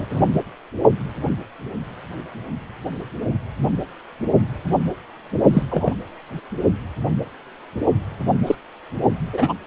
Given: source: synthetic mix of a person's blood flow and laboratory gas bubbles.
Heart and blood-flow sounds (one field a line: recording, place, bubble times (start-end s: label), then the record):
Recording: Doppler ultrasound of blood flow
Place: precordium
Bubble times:
0.00-0.06 s: bubbles
0.10-0.21 s: bubbles
5.53-5.63 s: bubbles
5.69-5.94 s: bubbles
8.46-8.55 s: bubbles
9.33-9.53 s: bubbles
From the record:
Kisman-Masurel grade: 123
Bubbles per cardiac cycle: 1 to 2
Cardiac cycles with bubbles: 10 to 50%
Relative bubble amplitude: loud (0.450 to 0.775)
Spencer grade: 2 (many but less than half of the cardiac periods contain bubble signals, singularly or in groups)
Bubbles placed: only in the low amplitude regions of the cardiac cycle